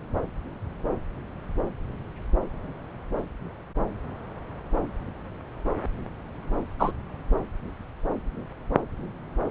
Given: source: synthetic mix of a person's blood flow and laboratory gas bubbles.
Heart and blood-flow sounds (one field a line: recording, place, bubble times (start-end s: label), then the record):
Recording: Doppler ultrasound of blood flow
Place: subclavian vein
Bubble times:
6.79-6.92 s: bubbles
From the record:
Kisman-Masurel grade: 113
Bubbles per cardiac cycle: 1 to 2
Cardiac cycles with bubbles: 1 to 10%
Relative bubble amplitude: loud (0.450 to 0.775)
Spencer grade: 1 (occasional bubble signal discernible with the cardiac motion signal, with majority of cardiac periods free of bubbles)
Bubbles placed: anywhere in the cardiac cycle